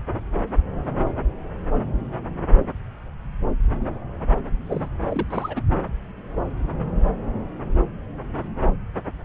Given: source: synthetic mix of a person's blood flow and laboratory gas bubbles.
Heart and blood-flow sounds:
Doppler ultrasound of blood flow; subclavian vein
4.67-4.88 s: bubbles
5.09-5.62 s: bubbles
From the record:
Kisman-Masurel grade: 211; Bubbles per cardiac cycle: several, 3 to 8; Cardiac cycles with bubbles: 1 to 10%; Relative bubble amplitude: barely perceptible (0.100 to 0.250); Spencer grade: 1 (occasional bubble signal discernible with the cardiac motion signal, with majority of cardiac periods free of bubbles); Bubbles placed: anywhere in the cardiac cycle

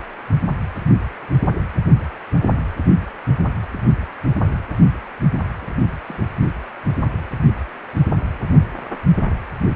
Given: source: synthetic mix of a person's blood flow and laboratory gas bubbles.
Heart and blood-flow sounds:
Doppler ultrasound of blood flow; precordium
5.62-5.74 s: bubbles
6.08-6.22 s: bubbles
From the record:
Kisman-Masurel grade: 111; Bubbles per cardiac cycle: 1 to 2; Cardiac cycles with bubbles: 1 to 10%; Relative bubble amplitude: barely perceptible (0.100 to 0.250); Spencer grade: 1 (occasional bubble signal discernible with the cardiac motion signal, with majority of cardiac periods free of bubbles); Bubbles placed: only in the low amplitude regions of the cardiac cycle

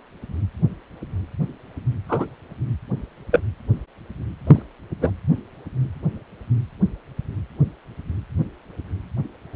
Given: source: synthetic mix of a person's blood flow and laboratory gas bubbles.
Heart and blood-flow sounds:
Doppler ultrasound of blood flow; precordium
2.08-2.27 s: bubbles
3.31-3.40 s: bubbles
4.47-4.62 s: bubbles
5.01-5.11 s: bubbles
From the record:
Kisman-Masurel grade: 123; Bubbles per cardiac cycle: 1 to 2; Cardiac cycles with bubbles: 10 to 50%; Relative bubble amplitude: loud (0.450 to 0.775); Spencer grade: 2 (many but less than half of the cardiac periods contain bubble signals, singularly or in groups); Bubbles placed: anywhere in the cardiac cycle

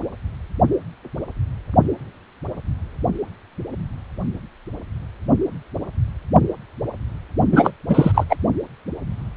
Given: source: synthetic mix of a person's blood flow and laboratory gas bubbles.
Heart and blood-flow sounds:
Doppler ultrasound of blood flow; precordium
7.51-7.71 s: bubbles
7.89-8.24 s: bubbles
8.29-8.37 s: bubbles
From the record:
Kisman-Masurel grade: 223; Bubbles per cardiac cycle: several, 3 to 8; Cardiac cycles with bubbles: 10 to 50%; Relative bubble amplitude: loud (0.450 to 0.775); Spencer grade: 2 (many but less than half of the cardiac periods contain bubble signals, singularly or in groups); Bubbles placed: only in the low amplitude regions of the cardiac cycle

